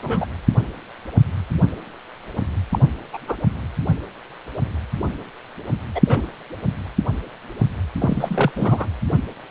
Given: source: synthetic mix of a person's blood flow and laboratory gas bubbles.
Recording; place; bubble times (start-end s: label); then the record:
Doppler ultrasound of blood flow; precordium
0.03-0.26 s: bubbles
2.72-2.80 s: bubbles
3.13-3.18 s: bubbles
3.28-3.37 s: bubbles
5.95-6.01 s: bubbles
6.07-6.25 s: bubbles
8.00-8.52 s: bubbles
8.55-8.87 s: bubbles
From the record:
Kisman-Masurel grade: 222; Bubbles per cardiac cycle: several, 3 to 8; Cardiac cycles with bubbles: 10 to 50%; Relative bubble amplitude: moderate (0.250 to 0.450); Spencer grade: 2 (many but less than half of the cardiac periods contain bubble signals, singularly or in groups); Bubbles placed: anywhere in the cardiac cycle